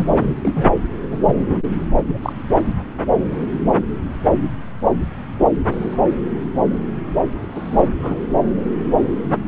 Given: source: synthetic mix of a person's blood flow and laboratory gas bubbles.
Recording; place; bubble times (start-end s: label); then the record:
Doppler ultrasound of blood flow; subclavian vein
0.00-0.35 s: bubbles
0.45-0.68 s: bubbles
1.11-1.18 s: bubbles
1.26-1.34 s: bubbles
2.06-2.32 s: bubbles
5.71-5.98 s: bubbles
7.55-7.89 s: bubbles
8.00-8.21 s: bubbles
From the record:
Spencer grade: 2 (many but less than half of the cardiac periods contain bubble signals, singularly or in groups); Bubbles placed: anywhere in the cardiac cycle